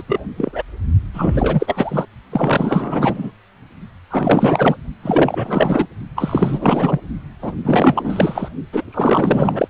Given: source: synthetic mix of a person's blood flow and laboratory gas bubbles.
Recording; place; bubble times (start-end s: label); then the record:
Doppler ultrasound of blood flow; precordium
0.00-0.03 s: bubbles
0.06-0.20 s: bubbles
0.36-0.62 s: bubbles
1.14-2.05 s: bubbles
2.31-3.31 s: bubbles
4.10-4.77 s: bubbles
5.02-5.86 s: bubbles
6.16-7.00 s: bubbles
7.42-7.52 s: bubbles
7.63-8.48 s: bubbles
8.72-8.84 s: bubbles
8.92-9.68 s: bubbles
From the record:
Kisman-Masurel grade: 444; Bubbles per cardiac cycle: continuous sound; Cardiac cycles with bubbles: 100%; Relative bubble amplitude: maximal (0.775 to 0.999); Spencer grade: 4 (maximum detectable bubble signal sounding continuously throughout systole and diastole of every cardiac period, and overriding the amplitude of the normal cardiac signals); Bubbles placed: only in the low amplitude regions of the cardiac cycle